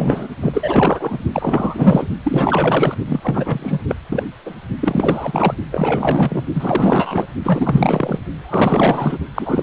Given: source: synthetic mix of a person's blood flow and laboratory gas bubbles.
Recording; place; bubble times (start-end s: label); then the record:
Doppler ultrasound of blood flow; precordium
0.00-0.28 s: bubbles
0.41-1.19 s: bubbles
1.32-2.07 s: bubbles
2.24-2.95 s: bubbles
3.05-3.80 s: bubbles
3.88-3.96 s: bubbles
4.09-4.24 s: bubbles
4.46-4.56 s: bubbles
4.81-5.54 s: bubbles
5.71-6.45 s: bubbles
6.54-7.26 s: bubbles
7.44-8.19 s: bubbles
8.43-9.17 s: bubbles
9.34-9.63 s: bubbles
From the record:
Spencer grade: 4 (maximum detectable bubble signal sounding continuously throughout systole and diastole of every cardiac period, and overriding the amplitude of the normal cardiac signals); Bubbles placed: only in the low amplitude regions of the cardiac cycle